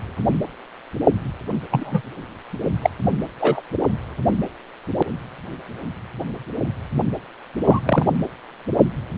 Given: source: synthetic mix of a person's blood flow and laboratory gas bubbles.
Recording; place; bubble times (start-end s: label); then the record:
Doppler ultrasound of blood flow; precordium
1.71-2.02 s: bubbles
2.81-2.90 s: bubbles
3.40-3.61 s: bubbles
7.64-7.80 s: bubbles
7.86-8.06 s: bubbles
From the record:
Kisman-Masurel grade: 123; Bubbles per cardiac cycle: 1 to 2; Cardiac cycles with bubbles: 10 to 50%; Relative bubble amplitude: loud (0.450 to 0.775); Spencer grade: 2 (many but less than half of the cardiac periods contain bubble signals, singularly or in groups); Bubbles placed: only in the low amplitude regions of the cardiac cycle